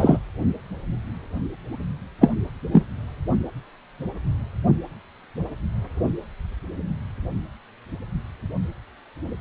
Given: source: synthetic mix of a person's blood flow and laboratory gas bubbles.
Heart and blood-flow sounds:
Doppler ultrasound of blood flow; precordium
0.00-0.19 s: bubbles
2.20-2.32 s: bubbles
2.72-2.84 s: bubbles
From the record:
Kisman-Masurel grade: 123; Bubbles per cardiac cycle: 1 to 2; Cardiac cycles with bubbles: 10 to 50%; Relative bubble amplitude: loud (0.450 to 0.775); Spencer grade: 2 (many but less than half of the cardiac periods contain bubble signals, singularly or in groups); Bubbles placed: only in the low amplitude regions of the cardiac cycle

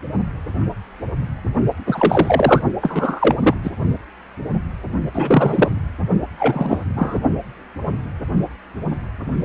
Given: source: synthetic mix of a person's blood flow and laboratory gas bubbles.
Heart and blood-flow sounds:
Doppler ultrasound of blood flow; precordium
1.87-2.62 s: bubbles
2.81-3.35 s: bubbles
3.43-3.54 s: bubbles
3.64-3.71 s: bubbles
5.12-5.70 s: bubbles
6.37-6.84 s: bubbles
6.96-7.20 s: bubbles
From the record:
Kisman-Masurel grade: 233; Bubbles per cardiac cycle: several, 3 to 8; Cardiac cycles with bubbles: 50 to 99%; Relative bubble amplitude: loud (0.450 to 0.775); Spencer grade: 3 (all of the cardiac periods contain showers or single bubble signals, but not dominating or overriding the cardiac motion signals); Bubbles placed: only in the low amplitude regions of the cardiac cycle

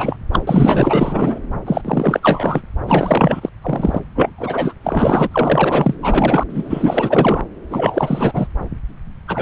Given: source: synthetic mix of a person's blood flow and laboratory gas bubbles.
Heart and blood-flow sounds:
Doppler ultrasound of blood flow; subclavian vein
0.00-0.17 s: bubbles
0.32-0.42 s: bubbles
0.47-1.39 s: bubbles
1.67-1.81 s: bubbles
1.84-2.61 s: bubbles
2.86-3.49 s: bubbles
3.62-4.00 s: bubbles
4.15-4.29 s: bubbles
4.38-4.74 s: bubbles
4.83-5.29 s: bubbles
5.31-5.95 s: bubbles
6.02-6.44 s: bubbles
6.50-7.43 s: bubbles
7.70-8.47 s: bubbles
9.27-9.42 s: bubbles
From the record:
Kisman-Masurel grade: 444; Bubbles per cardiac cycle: continuous sound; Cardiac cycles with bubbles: 100%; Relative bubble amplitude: maximal (0.775 to 0.999); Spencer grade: 4 (maximum detectable bubble signal sounding continuously throughout systole and diastole of every cardiac period, and overriding the amplitude of the normal cardiac signals); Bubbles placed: anywhere in the cardiac cycle

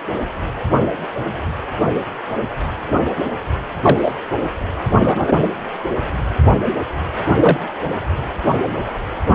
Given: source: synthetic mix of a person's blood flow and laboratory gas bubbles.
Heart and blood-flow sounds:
Doppler ultrasound of blood flow; precordium
3.82-4.15 s: bubbles
4.99-5.34 s: bubbles
7.36-7.58 s: bubbles
From the record:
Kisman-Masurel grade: 223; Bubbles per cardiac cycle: several, 3 to 8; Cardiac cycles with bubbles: 10 to 50%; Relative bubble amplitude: loud (0.450 to 0.775); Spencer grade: 2 (many but less than half of the cardiac periods contain bubble signals, singularly or in groups); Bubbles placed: anywhere in the cardiac cycle

